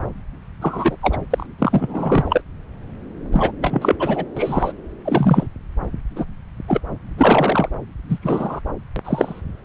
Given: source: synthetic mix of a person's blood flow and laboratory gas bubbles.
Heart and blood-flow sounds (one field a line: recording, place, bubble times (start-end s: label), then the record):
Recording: Doppler ultrasound of blood flow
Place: subclavian vein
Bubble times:
0.61-0.96 s: bubbles
1.01-1.17 s: bubbles
1.30-1.46 s: bubbles
1.58-2.42 s: bubbles
3.32-3.52 s: bubbles
3.60-3.96 s: bubbles
3.98-4.25 s: bubbles
4.36-4.72 s: bubbles
5.05-5.47 s: bubbles
6.15-6.26 s: bubbles
6.67-6.80 s: bubbles
7.17-7.69 s: bubbles
8.09-8.19 s: bubbles
8.22-8.61 s: bubbles
8.96-9.01 s: bubbles
9.04-9.42 s: bubbles
From the record:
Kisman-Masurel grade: 233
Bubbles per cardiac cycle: several, 3 to 8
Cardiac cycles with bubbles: 50 to 99%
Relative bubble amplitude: loud (0.450 to 0.775)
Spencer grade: 3 (all of the cardiac periods contain showers or single bubble signals, but not dominating or overriding the cardiac motion signals)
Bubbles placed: anywhere in the cardiac cycle